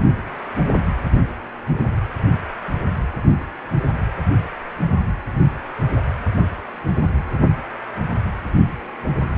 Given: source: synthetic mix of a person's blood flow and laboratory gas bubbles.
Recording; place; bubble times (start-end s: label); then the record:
Doppler ultrasound of blood flow; precordium
no bubbles
From the record:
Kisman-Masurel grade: 000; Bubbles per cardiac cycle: 0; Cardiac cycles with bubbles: 0%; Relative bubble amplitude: no bubbles discernible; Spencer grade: 0 (complete lack of bubble signals)